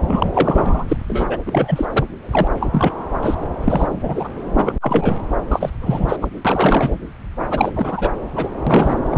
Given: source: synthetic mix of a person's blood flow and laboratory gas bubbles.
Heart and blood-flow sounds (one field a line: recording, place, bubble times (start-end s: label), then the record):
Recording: Doppler ultrasound of blood flow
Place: subclavian vein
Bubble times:
0.08-0.31 s: bubbles
0.34-0.85 s: bubbles
0.88-0.97 s: bubbles
1.08-1.27 s: bubbles
1.30-1.38 s: bubbles
1.46-1.86 s: bubbles
1.93-2.06 s: bubbles
2.31-2.47 s: bubbles
2.60-2.93 s: bubbles
3.21-3.35 s: bubbles
3.42-3.47 s: bubbles
3.60-3.89 s: bubbles
4.03-4.28 s: bubbles
4.58-4.73 s: bubbles
4.81-5.16 s: bubbles
5.50-5.70 s: bubbles
5.81-6.17 s: bubbles
6.21-6.28 s: bubbles
6.45-6.90 s: bubbles
7.50-7.72 s: bubbles
7.75-8.10 s: bubbles
8.35-8.49 s: bubbles
8.67-8.95 s: bubbles
9.11-9.18 s: bubbles
From the record:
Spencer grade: 3 (all of the cardiac periods contain showers or single bubble signals, but not dominating or overriding the cardiac motion signals)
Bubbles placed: anywhere in the cardiac cycle